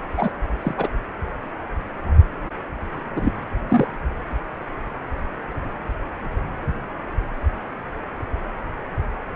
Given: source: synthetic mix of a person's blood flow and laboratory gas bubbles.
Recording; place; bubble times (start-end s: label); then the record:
Doppler ultrasound of blood flow; precordium
0.17-0.32 s: bubbles
0.61-0.74 s: bubbles
0.78-0.88 s: bubbles
3.16-3.32 s: bubbles
3.69-3.88 s: bubbles
From the record:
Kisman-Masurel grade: 222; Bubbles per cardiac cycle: several, 3 to 8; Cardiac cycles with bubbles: 10 to 50%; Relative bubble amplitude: moderate (0.250 to 0.450); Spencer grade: 2 (many but less than half of the cardiac periods contain bubble signals, singularly or in groups); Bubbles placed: anywhere in the cardiac cycle